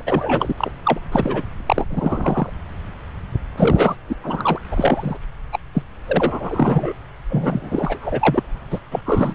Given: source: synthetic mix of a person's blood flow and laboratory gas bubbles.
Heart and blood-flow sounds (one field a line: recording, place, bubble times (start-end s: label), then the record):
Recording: Doppler ultrasound of blood flow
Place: subclavian vein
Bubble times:
0.00-0.02 s: bubbles
0.06-0.52 s: bubbles
0.57-0.71 s: bubbles
0.84-1.00 s: bubbles
1.11-1.43 s: bubbles
1.66-1.86 s: bubbles
1.90-2.50 s: bubbles
3.56-3.96 s: bubbles
4.08-4.15 s: bubbles
4.23-4.59 s: bubbles
4.71-5.17 s: bubbles
5.52-5.58 s: bubbles
5.73-5.82 s: bubbles
6.08-6.93 s: bubbles
7.29-8.43 s: bubbles
8.70-8.79 s: bubbles
8.90-9.02 s: bubbles
9.05-9.35 s: bubbles
From the record:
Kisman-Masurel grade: 333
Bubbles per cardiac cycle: rolling drumbeat, 9 or more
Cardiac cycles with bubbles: 50 to 99%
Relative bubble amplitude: loud (0.450 to 0.775)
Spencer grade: 3 (all of the cardiac periods contain showers or single bubble signals, but not dominating or overriding the cardiac motion signals)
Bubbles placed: anywhere in the cardiac cycle